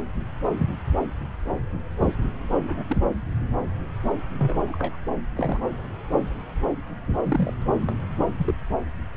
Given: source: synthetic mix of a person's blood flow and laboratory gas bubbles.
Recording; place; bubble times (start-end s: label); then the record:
Doppler ultrasound of blood flow; subclavian vein
2.00-2.09 s: bubbles
2.60-2.83 s: bubbles
2.89-2.97 s: bubbles
4.39-4.60 s: bubbles
4.68-4.96 s: bubbles
5.37-5.61 s: bubbles
5.63-5.67 s: bubbles
5.70-5.76 s: bubbles
7.24-7.51 s: bubbles
7.81-7.96 s: bubbles
8.38-8.54 s: bubbles
From the record:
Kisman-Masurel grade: 121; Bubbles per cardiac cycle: 1 to 2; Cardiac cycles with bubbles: 10 to 50%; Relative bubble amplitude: barely perceptible (0.100 to 0.250); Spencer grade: 2 (many but less than half of the cardiac periods contain bubble signals, singularly or in groups); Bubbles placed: anywhere in the cardiac cycle